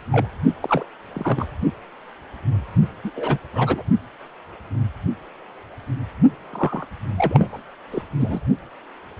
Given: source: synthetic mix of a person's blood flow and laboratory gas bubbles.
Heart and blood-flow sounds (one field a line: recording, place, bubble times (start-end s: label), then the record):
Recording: Doppler ultrasound of blood flow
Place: precordium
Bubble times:
0.11-0.27 s: bubbles
0.62-0.86 s: bubbles
1.13-1.47 s: bubbles
3.04-3.11 s: bubbles
3.16-3.38 s: bubbles
3.54-3.83 s: bubbles
6.53-6.85 s: bubbles
7.17-7.62 s: bubbles
7.91-8.03 s: bubbles
8.20-8.40 s: bubbles
From the record:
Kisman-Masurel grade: 222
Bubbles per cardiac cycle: several, 3 to 8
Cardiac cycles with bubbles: 10 to 50%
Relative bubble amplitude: moderate (0.250 to 0.450)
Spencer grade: 2 (many but less than half of the cardiac periods contain bubble signals, singularly or in groups)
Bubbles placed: only in the low amplitude regions of the cardiac cycle